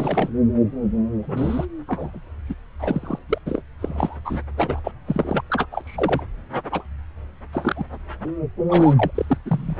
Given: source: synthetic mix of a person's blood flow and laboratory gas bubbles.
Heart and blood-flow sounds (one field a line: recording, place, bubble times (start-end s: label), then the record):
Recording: Doppler ultrasound of blood flow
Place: subclavian vein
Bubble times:
0.00-0.29 s: bubbles
1.22-1.66 s: bubbles
1.88-2.21 s: bubbles
2.49-2.54 s: bubbles
2.80-3.19 s: bubbles
3.29-3.38 s: bubbles
3.46-3.62 s: bubbles
3.79-4.17 s: bubbles
4.25-4.40 s: bubbles
4.57-4.79 s: bubbles
4.84-4.92 s: bubbles
5.08-5.42 s: bubbles
5.50-5.66 s: bubbles
5.71-6.26 s: bubbles
6.72-6.84 s: bubbles
7.53-7.85 s: bubbles
8.69-8.94 s: bubbles
8.97-9.11 s: bubbles
9.14-9.38 s: bubbles
9.46-9.77 s: bubbles
From the record:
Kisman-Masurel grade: 232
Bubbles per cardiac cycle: several, 3 to 8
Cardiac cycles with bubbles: 50 to 99%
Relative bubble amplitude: moderate (0.250 to 0.450)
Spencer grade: 3 (all of the cardiac periods contain showers or single bubble signals, but not dominating or overriding the cardiac motion signals)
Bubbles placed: anywhere in the cardiac cycle